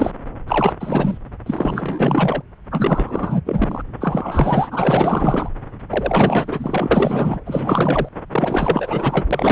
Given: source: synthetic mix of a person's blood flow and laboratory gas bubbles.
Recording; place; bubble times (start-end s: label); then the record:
Doppler ultrasound of blood flow; subclavian vein
0.00-0.11 s: bubbles
0.47-0.72 s: bubbles
0.80-1.19 s: bubbles
1.46-2.42 s: bubbles
2.71-3.41 s: bubbles
3.45-3.82 s: bubbles
4.00-4.68 s: bubbles
4.71-5.48 s: bubbles
5.89-6.88 s: bubbles
6.91-7.40 s: bubbles
7.45-8.09 s: bubbles
8.31-9.26 s: bubbles
9.30-9.51 s: bubbles
From the record:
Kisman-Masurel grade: 444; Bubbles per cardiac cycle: continuous sound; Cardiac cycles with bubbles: 100%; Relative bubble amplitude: maximal (0.775 to 0.999); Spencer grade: 4 (maximum detectable bubble signal sounding continuously throughout systole and diastole of every cardiac period, and overriding the amplitude of the normal cardiac signals); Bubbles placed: anywhere in the cardiac cycle